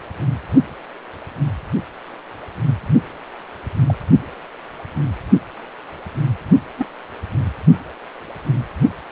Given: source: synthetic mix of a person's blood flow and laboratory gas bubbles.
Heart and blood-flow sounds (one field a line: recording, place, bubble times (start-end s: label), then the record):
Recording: Doppler ultrasound of blood flow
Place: precordium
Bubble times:
3.88-3.98 s: bubbles
6.78-6.86 s: bubbles
From the record:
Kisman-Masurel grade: 122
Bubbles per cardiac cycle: 1 to 2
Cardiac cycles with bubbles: 10 to 50%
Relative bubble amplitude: moderate (0.250 to 0.450)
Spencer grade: 2 (many but less than half of the cardiac periods contain bubble signals, singularly or in groups)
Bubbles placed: only in the low amplitude regions of the cardiac cycle